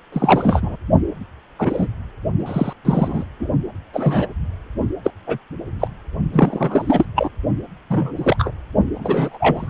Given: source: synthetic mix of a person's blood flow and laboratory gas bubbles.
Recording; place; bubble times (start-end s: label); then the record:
Doppler ultrasound of blood flow; precordium
0.12-0.76 s: bubbles
1.58-1.87 s: bubbles
2.39-2.73 s: bubbles
2.85-3.25 s: bubbles
3.40-3.48 s: bubbles
3.94-4.26 s: bubbles
5.03-5.11 s: bubbles
5.26-5.38 s: bubbles
5.80-5.88 s: bubbles
6.32-7.05 s: bubbles
7.15-7.28 s: bubbles
7.90-8.37 s: bubbles
8.39-8.51 s: bubbles
8.95-9.69 s: bubbles
From the record:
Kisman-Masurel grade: 243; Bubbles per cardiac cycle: several, 3 to 8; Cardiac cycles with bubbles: 100%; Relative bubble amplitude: loud (0.450 to 0.775); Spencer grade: 3 (all of the cardiac periods contain showers or single bubble signals, but not dominating or overriding the cardiac motion signals); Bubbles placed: only in the low amplitude regions of the cardiac cycle